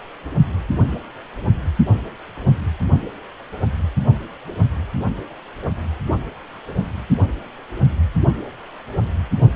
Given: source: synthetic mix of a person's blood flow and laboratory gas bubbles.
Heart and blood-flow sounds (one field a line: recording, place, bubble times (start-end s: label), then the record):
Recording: Doppler ultrasound of blood flow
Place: precordium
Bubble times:
no bubbles
From the record:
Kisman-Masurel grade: 000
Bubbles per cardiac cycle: 0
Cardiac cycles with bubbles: 0%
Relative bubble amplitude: no bubbles discernible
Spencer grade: 0 (complete lack of bubble signals)